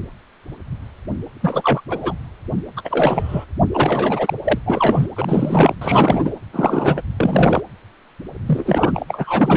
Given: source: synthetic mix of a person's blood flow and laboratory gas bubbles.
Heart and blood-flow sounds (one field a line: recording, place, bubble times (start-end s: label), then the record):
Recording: Doppler ultrasound of blood flow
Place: precordium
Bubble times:
1.41-1.81 s: bubbles
1.88-2.14 s: bubbles
2.77-2.82 s: bubbles
2.85-3.46 s: bubbles
3.74-4.33 s: bubbles
4.44-4.58 s: bubbles
4.66-5.07 s: bubbles
5.16-5.75 s: bubbles
5.81-6.34 s: bubbles
6.53-7.02 s: bubbles
7.17-7.62 s: bubbles
8.46-9.05 s: bubbles
9.08-9.57 s: bubbles
From the record:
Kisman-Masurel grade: 333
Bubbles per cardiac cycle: rolling drumbeat, 9 or more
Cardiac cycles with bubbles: 50 to 99%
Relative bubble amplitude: loud (0.450 to 0.775)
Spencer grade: 3 (all of the cardiac periods contain showers or single bubble signals, but not dominating or overriding the cardiac motion signals)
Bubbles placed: anywhere in the cardiac cycle